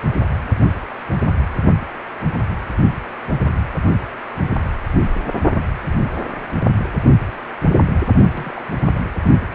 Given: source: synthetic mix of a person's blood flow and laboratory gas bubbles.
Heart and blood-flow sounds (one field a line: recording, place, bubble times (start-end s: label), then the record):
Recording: Doppler ultrasound of blood flow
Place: precordium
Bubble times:
8.34-8.66 s: bubbles
8.95-9.00 s: bubbles
From the record:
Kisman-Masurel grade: 211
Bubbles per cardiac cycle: several, 3 to 8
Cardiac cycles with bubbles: 1 to 10%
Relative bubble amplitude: barely perceptible (0.100 to 0.250)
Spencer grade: 1 (occasional bubble signal discernible with the cardiac motion signal, with majority of cardiac periods free of bubbles)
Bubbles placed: anywhere in the cardiac cycle